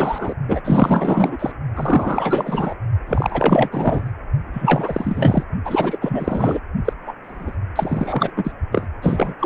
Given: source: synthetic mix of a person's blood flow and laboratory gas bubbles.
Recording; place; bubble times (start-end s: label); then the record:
Doppler ultrasound of blood flow; precordium
0.00-0.34 s: bubbles
0.48-0.61 s: bubbles
0.64-1.52 s: bubbles
1.75-2.75 s: bubbles
3.06-3.69 s: bubbles
3.71-4.12 s: bubbles
4.53-5.44 s: bubbles
5.65-6.61 s: bubbles
6.84-6.93 s: bubbles
7.05-7.13 s: bubbles
7.23-7.57 s: bubbles
7.75-8.32 s: bubbles
8.36-8.52 s: bubbles
8.71-8.88 s: bubbles
9.02-9.34 s: bubbles
9.39-9.46 s: bubbles
From the record:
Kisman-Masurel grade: 444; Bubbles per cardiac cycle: continuous sound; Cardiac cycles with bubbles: 100%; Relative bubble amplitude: maximal (0.775 to 0.999); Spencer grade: 4 (maximum detectable bubble signal sounding continuously throughout systole and diastole of every cardiac period, and overriding the amplitude of the normal cardiac signals); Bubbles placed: only in the low amplitude regions of the cardiac cycle